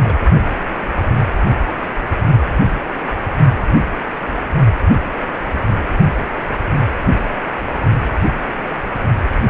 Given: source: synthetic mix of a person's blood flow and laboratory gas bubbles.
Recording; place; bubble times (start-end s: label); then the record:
Doppler ultrasound of blood flow; precordium
0.03-0.17 s: bubbles
From the record:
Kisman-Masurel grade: 211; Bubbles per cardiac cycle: several, 3 to 8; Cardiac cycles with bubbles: 1 to 10%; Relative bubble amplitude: barely perceptible (0.100 to 0.250); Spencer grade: 1 (occasional bubble signal discernible with the cardiac motion signal, with majority of cardiac periods free of bubbles); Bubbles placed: only in the low amplitude regions of the cardiac cycle